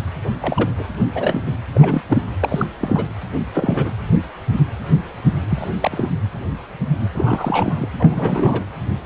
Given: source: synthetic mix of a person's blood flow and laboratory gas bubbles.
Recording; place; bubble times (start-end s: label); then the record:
Doppler ultrasound of blood flow; precordium
0.41-0.69 s: bubbles
0.78-0.84 s: bubbles
1.14-1.42 s: bubbles
1.75-2.02 s: bubbles
2.08-2.19 s: bubbles
2.42-2.66 s: bubbles
2.80-3.05 s: bubbles
3.53-3.89 s: bubbles
5.49-5.70 s: bubbles
5.80-6.12 s: bubbles
7.15-7.86 s: bubbles
7.98-8.64 s: bubbles
From the record:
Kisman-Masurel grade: 232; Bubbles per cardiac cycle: several, 3 to 8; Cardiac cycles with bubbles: 50 to 99%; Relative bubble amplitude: moderate (0.250 to 0.450); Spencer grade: 3 (all of the cardiac periods contain showers or single bubble signals, but not dominating or overriding the cardiac motion signals); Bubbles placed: anywhere in the cardiac cycle